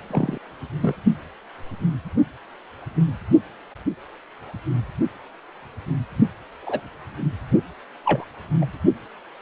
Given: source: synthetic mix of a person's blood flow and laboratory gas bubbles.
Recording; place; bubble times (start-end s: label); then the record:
Doppler ultrasound of blood flow; precordium
0.10-0.38 s: bubbles
0.81-0.95 s: bubbles
6.62-6.80 s: bubbles
8.05-8.24 s: bubbles
8.61-8.65 s: bubbles
From the record:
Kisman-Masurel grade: 122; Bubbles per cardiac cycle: 1 to 2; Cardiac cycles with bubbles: 10 to 50%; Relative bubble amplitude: moderate (0.250 to 0.450); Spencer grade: 2 (many but less than half of the cardiac periods contain bubble signals, singularly or in groups); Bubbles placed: only in the low amplitude regions of the cardiac cycle